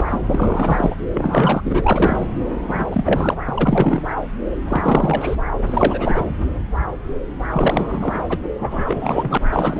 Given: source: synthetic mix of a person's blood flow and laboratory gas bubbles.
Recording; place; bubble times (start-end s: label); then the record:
Doppler ultrasound of blood flow; subclavian vein
0.00-0.20 s: bubbles
0.30-0.95 s: bubbles
1.14-1.61 s: bubbles
1.65-2.27 s: bubbles
2.69-2.86 s: bubbles
2.91-3.35 s: bubbles
3.48-4.01 s: bubbles
4.69-5.37 s: bubbles
5.66-6.34 s: bubbles
7.53-8.38 s: bubbles
8.59-9.38 s: bubbles
9.49-9.79 s: bubbles
From the record:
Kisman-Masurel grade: 333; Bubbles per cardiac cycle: rolling drumbeat, 9 or more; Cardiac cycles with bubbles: 50 to 99%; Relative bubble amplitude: loud (0.450 to 0.775); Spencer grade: 3 (all of the cardiac periods contain showers or single bubble signals, but not dominating or overriding the cardiac motion signals); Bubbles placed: anywhere in the cardiac cycle